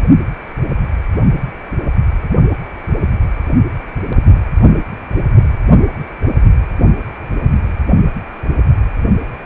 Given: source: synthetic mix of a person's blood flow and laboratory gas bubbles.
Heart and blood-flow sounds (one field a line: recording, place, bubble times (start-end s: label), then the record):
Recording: Doppler ultrasound of blood flow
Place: precordium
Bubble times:
no bubbles
From the record:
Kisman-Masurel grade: 000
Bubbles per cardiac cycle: 0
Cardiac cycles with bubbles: 0%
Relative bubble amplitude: no bubbles discernible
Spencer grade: 0 (complete lack of bubble signals)